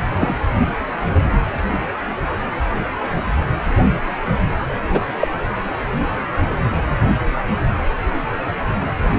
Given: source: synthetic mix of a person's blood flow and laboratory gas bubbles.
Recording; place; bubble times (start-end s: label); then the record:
Doppler ultrasound of blood flow; precordium
0.19-0.35 s: bubbles
4.92-5.00 s: bubbles
5.20-5.28 s: bubbles
From the record:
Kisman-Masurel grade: 123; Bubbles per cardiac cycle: 1 to 2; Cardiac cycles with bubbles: 10 to 50%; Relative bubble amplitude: loud (0.450 to 0.775); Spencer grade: 2 (many but less than half of the cardiac periods contain bubble signals, singularly or in groups); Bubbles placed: anywhere in the cardiac cycle